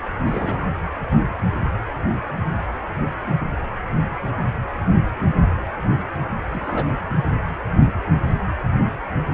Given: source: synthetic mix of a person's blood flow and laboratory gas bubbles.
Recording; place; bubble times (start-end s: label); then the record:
Doppler ultrasound of blood flow; precordium
0.27-0.67 s: bubbles
6.52-6.91 s: bubbles
From the record:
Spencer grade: 1 (occasional bubble signal discernible with the cardiac motion signal, with majority of cardiac periods free of bubbles); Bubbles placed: anywhere in the cardiac cycle